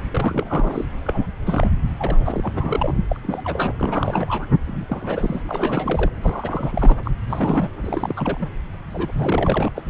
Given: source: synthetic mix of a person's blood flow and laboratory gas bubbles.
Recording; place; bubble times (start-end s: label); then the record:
Doppler ultrasound of blood flow; subclavian vein
0.13-0.85 s: bubbles
1.04-1.26 s: bubbles
1.44-1.71 s: bubbles
1.98-2.94 s: bubbles
3.09-3.42 s: bubbles
3.44-3.73 s: bubbles
3.79-4.46 s: bubbles
4.67-6.10 s: bubbles
6.21-6.97 s: bubbles
7.04-7.11 s: bubbles
7.27-7.70 s: bubbles
7.81-8.49 s: bubbles
8.94-9.69 s: bubbles
9.75-9.82 s: bubbles
From the record:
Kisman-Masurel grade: 342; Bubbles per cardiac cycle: rolling drumbeat, 9 or more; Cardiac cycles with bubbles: 100%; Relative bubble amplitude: moderate (0.250 to 0.450); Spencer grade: 3 (all of the cardiac periods contain showers or single bubble signals, but not dominating or overriding the cardiac motion signals); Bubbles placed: anywhere in the cardiac cycle